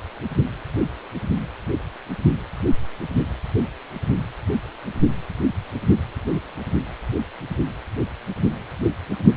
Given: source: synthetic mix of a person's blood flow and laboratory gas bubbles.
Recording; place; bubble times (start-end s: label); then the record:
Doppler ultrasound of blood flow; precordium
no bubbles
From the record:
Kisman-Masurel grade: 000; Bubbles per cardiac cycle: 0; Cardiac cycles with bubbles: 0%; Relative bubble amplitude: no bubbles discernible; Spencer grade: 0 (complete lack of bubble signals)